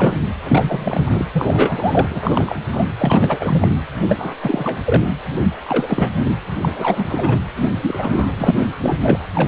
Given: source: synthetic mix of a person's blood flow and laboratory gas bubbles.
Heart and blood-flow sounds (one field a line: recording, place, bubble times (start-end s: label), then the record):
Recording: Doppler ultrasound of blood flow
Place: precordium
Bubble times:
0.00-0.18 s: bubbles
0.44-1.25 s: bubbles
1.33-2.08 s: bubbles
2.10-2.56 s: bubbles
2.72-2.85 s: bubbles
2.99-3.71 s: bubbles
4.08-4.35 s: bubbles
4.41-4.80 s: bubbles
4.84-5.04 s: bubbles
5.63-6.09 s: bubbles
6.25-6.33 s: bubbles
6.61-7.38 s: bubbles
7.55-7.68 s: bubbles
7.81-8.31 s: bubbles
8.38-8.67 s: bubbles
8.81-8.97 s: bubbles
9.00-9.18 s: bubbles
9.34-9.47 s: bubbles
From the record:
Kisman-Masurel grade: 343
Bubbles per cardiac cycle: rolling drumbeat, 9 or more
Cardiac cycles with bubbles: 100%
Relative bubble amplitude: loud (0.450 to 0.775)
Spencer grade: 3 (all of the cardiac periods contain showers or single bubble signals, but not dominating or overriding the cardiac motion signals)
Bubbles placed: anywhere in the cardiac cycle